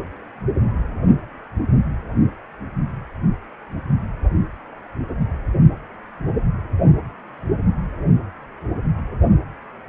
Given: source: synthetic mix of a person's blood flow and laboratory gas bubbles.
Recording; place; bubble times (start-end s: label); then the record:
Doppler ultrasound of blood flow; precordium
8.72-8.79 s: bubbles
From the record:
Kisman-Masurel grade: 121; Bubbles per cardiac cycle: 1 to 2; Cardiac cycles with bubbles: 10 to 50%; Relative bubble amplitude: barely perceptible (0.100 to 0.250); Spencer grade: 2 (many but less than half of the cardiac periods contain bubble signals, singularly or in groups); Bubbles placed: anywhere in the cardiac cycle